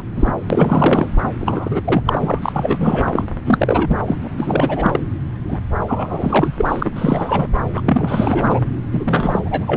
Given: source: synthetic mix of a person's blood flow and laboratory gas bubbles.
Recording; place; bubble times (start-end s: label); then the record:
Doppler ultrasound of blood flow; subclavian vein
0.00-0.02 s: bubbles
0.15-0.34 s: bubbles
0.50-1.07 s: bubbles
1.38-1.81 s: bubbles
1.84-2.40 s: bubbles
2.42-3.25 s: bubbles
3.45-3.98 s: bubbles
4.06-4.27 s: bubbles
4.38-5.00 s: bubbles
5.46-5.57 s: bubbles
5.86-6.53 s: bubbles
6.57-6.91 s: bubbles
6.95-7.47 s: bubbles
7.76-7.81 s: bubbles
7.84-8.59 s: bubbles
8.92-9.39 s: bubbles
9.42-9.77 s: bubbles
From the record:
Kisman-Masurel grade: 343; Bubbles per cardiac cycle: rolling drumbeat, 9 or more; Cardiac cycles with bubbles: 100%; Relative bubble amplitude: loud (0.450 to 0.775); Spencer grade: 3 (all of the cardiac periods contain showers or single bubble signals, but not dominating or overriding the cardiac motion signals); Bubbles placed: anywhere in the cardiac cycle